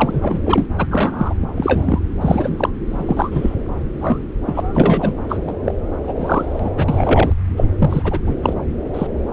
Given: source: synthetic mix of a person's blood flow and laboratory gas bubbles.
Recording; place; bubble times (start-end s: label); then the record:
Doppler ultrasound of blood flow; subclavian vein
0.00-0.41 s: bubbles
0.45-0.66 s: bubbles
0.78-0.85 s: bubbles
0.90-1.34 s: bubbles
1.57-1.99 s: bubbles
2.21-2.69 s: bubbles
2.90-3.55 s: bubbles
4.00-4.18 s: bubbles
4.45-4.60 s: bubbles
4.75-5.16 s: bubbles
5.29-5.74 s: bubbles
6.04-6.71 s: bubbles
6.76-7.33 s: bubbles
7.56-7.64 s: bubbles
7.78-8.19 s: bubbles
8.27-8.35 s: bubbles
8.43-8.54 s: bubbles
8.94-9.07 s: bubbles
From the record:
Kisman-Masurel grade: 243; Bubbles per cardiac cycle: several, 3 to 8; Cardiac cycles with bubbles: 100%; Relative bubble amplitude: loud (0.450 to 0.775); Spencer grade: 3 (all of the cardiac periods contain showers or single bubble signals, but not dominating or overriding the cardiac motion signals); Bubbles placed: anywhere in the cardiac cycle